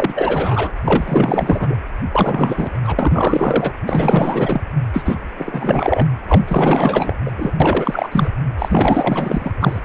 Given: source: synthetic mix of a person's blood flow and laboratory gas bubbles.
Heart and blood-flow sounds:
Doppler ultrasound of blood flow; precordium
0.00-0.72 s: bubbles
0.84-1.77 s: bubbles
2.12-2.80 s: bubbles
2.84-2.96 s: bubbles
2.99-3.73 s: bubbles
3.85-4.62 s: bubbles
4.93-5.18 s: bubbles
5.38-6.06 s: bubbles
6.28-6.42 s: bubbles
6.48-7.16 s: bubbles
7.25-7.31 s: bubbles
7.38-7.51 s: bubbles
7.60-8.08 s: bubbles
8.11-8.29 s: bubbles
8.58-9.51 s: bubbles
9.60-9.79 s: bubbles
From the record:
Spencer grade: 4 (maximum detectable bubble signal sounding continuously throughout systole and diastole of every cardiac period, and overriding the amplitude of the normal cardiac signals); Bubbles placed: anywhere in the cardiac cycle

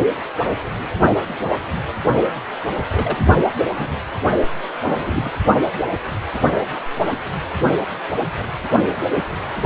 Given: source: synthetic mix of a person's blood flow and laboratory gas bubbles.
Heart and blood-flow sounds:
Doppler ultrasound of blood flow; precordium
2.92-3.17 s: bubbles
3.70-3.87 s: bubbles
4.82-5.30 s: bubbles
From the record:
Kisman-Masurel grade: 122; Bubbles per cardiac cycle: 1 to 2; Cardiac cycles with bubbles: 10 to 50%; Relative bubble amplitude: moderate (0.250 to 0.450); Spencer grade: 2 (many but less than half of the cardiac periods contain bubble signals, singularly or in groups); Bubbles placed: only in the low amplitude regions of the cardiac cycle

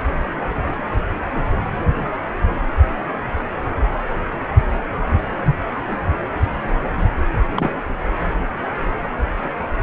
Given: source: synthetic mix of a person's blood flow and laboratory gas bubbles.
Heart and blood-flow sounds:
Doppler ultrasound of blood flow; precordium
7.52-7.70 s: bubbles
From the record:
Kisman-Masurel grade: 112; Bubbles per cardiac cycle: 1 to 2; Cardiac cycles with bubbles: 1 to 10%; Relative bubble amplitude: moderate (0.250 to 0.450); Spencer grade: 1 (occasional bubble signal discernible with the cardiac motion signal, with majority of cardiac periods free of bubbles); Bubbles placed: anywhere in the cardiac cycle

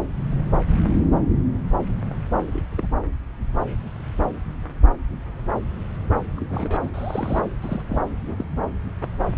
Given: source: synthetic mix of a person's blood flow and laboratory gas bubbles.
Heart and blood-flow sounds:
Doppler ultrasound of blood flow; subclavian vein
2.52-2.62 s: bubbles
2.71-2.87 s: bubbles
6.37-6.90 s: bubbles
6.94-7.48 s: bubbles
7.62-7.82 s: bubbles
7.89-7.98 s: bubbles
8.27-8.45 s: bubbles
8.47-8.63 s: bubbles
From the record:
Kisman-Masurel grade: 221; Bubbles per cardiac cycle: several, 3 to 8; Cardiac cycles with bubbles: 10 to 50%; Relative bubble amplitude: barely perceptible (0.100 to 0.250); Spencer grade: 2 (many but less than half of the cardiac periods contain bubble signals, singularly or in groups); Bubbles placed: anywhere in the cardiac cycle

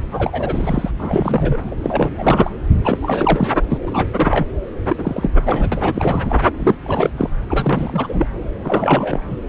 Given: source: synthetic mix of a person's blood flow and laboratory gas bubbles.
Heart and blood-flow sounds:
Doppler ultrasound of blood flow; subclavian vein
0.12-0.90 s: bubbles
0.98-1.75 s: bubbles
1.80-2.10 s: bubbles
2.17-2.50 s: bubbles
2.84-2.98 s: bubbles
3.02-3.60 s: bubbles
3.69-3.78 s: bubbles
3.82-4.11 s: bubbles
4.16-4.47 s: bubbles
4.89-5.30 s: bubbles
5.44-5.68 s: bubbles
5.72-6.42 s: bubbles
6.59-6.76 s: bubbles
6.86-7.11 s: bubbles
7.17-7.29 s: bubbles
7.50-8.28 s: bubbles
8.63-9.26 s: bubbles
9.30-9.38 s: bubbles
From the record:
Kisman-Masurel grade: 343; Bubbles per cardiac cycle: rolling drumbeat, 9 or more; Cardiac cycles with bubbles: 100%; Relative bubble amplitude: loud (0.450 to 0.775); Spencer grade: 3 (all of the cardiac periods contain showers or single bubble signals, but not dominating or overriding the cardiac motion signals); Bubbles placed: anywhere in the cardiac cycle

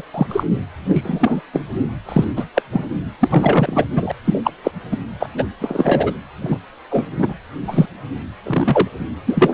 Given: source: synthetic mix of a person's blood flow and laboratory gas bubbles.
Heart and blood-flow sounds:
Doppler ultrasound of blood flow; precordium
0.00-0.02 s: bubbles
0.14-0.44 s: bubbles
0.88-1.41 s: bubbles
1.53-1.62 s: bubbles
2.08-2.25 s: bubbles
2.36-2.45 s: bubbles
2.54-2.62 s: bubbles
2.72-2.85 s: bubbles
3.20-3.85 s: bubbles
3.95-4.12 s: bubbles
4.24-4.41 s: bubbles
4.44-4.51 s: bubbles
4.63-4.71 s: bubbles
4.91-4.96 s: bubbles
5.20-5.28 s: bubbles
5.38-5.44 s: bubbles
5.60-6.12 s: bubbles
6.42-6.58 s: bubbles
6.91-7.06 s: bubbles
7.18-7.33 s: bubbles
7.67-7.86 s: bubbles
8.44-8.88 s: bubbles
9.27-9.54 s: bubbles
From the record:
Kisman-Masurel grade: 243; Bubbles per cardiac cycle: several, 3 to 8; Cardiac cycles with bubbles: 100%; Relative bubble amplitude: loud (0.450 to 0.775); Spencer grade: 3 (all of the cardiac periods contain showers or single bubble signals, but not dominating or overriding the cardiac motion signals); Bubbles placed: anywhere in the cardiac cycle

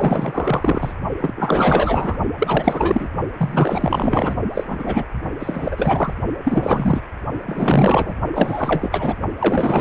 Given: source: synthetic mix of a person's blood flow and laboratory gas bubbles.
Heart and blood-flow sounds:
Doppler ultrasound of blood flow; precordium
0.00-0.93 s: bubbles
1.20-2.18 s: bubbles
2.38-3.09 s: bubbles
3.37-4.36 s: bubbles
4.53-5.06 s: bubbles
5.39-6.13 s: bubbles
6.44-7.01 s: bubbles
7.46-8.14 s: bubbles
8.33-9.16 s: bubbles
9.39-9.81 s: bubbles
From the record:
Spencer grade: 4 (maximum detectable bubble signal sounding continuously throughout systole and diastole of every cardiac period, and overriding the amplitude of the normal cardiac signals); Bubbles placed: only in the low amplitude regions of the cardiac cycle

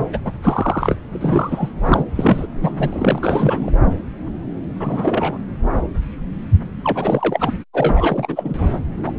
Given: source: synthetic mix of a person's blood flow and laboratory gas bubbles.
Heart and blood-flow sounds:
Doppler ultrasound of blood flow; subclavian vein
0.12-0.18 s: bubbles
0.24-0.32 s: bubbles
0.42-1.01 s: bubbles
1.09-1.70 s: bubbles
1.84-2.04 s: bubbles
2.16-2.47 s: bubbles
2.62-2.72 s: bubbles
2.78-2.90 s: bubbles
2.93-3.71 s: bubbles
4.79-5.38 s: bubbles
6.83-7.52 s: bubbles
7.73-8.68 s: bubbles
9.05-9.12 s: bubbles
From the record:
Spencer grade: 3 (all of the cardiac periods contain showers or single bubble signals, but not dominating or overriding the cardiac motion signals); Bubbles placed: anywhere in the cardiac cycle

